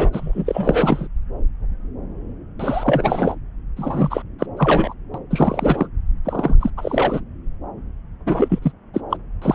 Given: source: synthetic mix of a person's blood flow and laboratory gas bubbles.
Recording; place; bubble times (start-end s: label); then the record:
Doppler ultrasound of blood flow; subclavian vein
0.00-0.10 s: bubbles
0.12-1.07 s: bubbles
2.59-3.35 s: bubbles
3.77-4.22 s: bubbles
4.39-4.46 s: bubbles
4.57-4.94 s: bubbles
5.14-5.18 s: bubbles
5.31-5.87 s: bubbles
6.25-6.56 s: bubbles
6.60-6.70 s: bubbles
6.77-7.21 s: bubbles
8.26-8.59 s: bubbles
8.62-8.72 s: bubbles
8.93-9.01 s: bubbles
9.10-9.16 s: bubbles
9.41-9.55 s: bubbles
From the record:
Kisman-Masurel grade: 332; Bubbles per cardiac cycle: rolling drumbeat, 9 or more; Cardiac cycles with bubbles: 50 to 99%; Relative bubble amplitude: moderate (0.250 to 0.450); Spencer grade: 3 (all of the cardiac periods contain showers or single bubble signals, but not dominating or overriding the cardiac motion signals); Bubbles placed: anywhere in the cardiac cycle